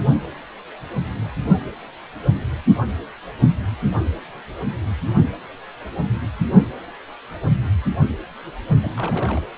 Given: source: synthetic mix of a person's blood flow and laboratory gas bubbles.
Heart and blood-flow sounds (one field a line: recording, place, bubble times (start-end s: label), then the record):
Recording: Doppler ultrasound of blood flow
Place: precordium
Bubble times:
8.81-8.92 s: bubbles
8.96-9.46 s: bubbles
From the record:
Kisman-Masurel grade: 211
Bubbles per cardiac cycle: several, 3 to 8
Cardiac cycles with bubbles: 1 to 10%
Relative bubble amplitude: barely perceptible (0.100 to 0.250)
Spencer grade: 1 (occasional bubble signal discernible with the cardiac motion signal, with majority of cardiac periods free of bubbles)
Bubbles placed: only in the low amplitude regions of the cardiac cycle